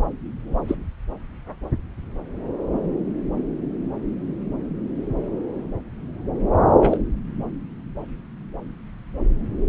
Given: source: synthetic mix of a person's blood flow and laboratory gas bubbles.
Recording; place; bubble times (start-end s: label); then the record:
Doppler ultrasound of blood flow; subclavian vein
0.68-0.76 s: bubbles
6.81-6.98 s: bubbles
From the record:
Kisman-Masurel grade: 123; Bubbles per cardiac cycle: 1 to 2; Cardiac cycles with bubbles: 10 to 50%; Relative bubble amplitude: loud (0.450 to 0.775); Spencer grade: 2 (many but less than half of the cardiac periods contain bubble signals, singularly or in groups); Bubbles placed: anywhere in the cardiac cycle